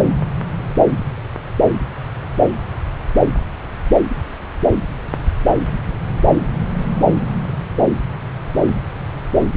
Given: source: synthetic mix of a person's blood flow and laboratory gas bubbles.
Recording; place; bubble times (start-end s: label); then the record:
Doppler ultrasound of blood flow; subclavian vein
no bubbles
From the record:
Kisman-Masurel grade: 000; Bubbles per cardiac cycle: 0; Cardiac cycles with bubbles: 0%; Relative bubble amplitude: no bubbles discernible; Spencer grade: 0 (complete lack of bubble signals)